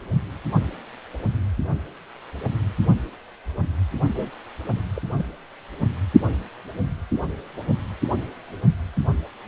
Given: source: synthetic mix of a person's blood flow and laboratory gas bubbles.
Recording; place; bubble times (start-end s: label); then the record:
Doppler ultrasound of blood flow; precordium
4.14-4.30 s: bubbles
4.96-5.01 s: bubbles
5.17-5.26 s: bubbles
From the record:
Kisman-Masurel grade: 121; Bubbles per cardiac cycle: 1 to 2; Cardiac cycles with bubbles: 10 to 50%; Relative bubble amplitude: barely perceptible (0.100 to 0.250); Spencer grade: 2 (many but less than half of the cardiac periods contain bubble signals, singularly or in groups); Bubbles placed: only in the low amplitude regions of the cardiac cycle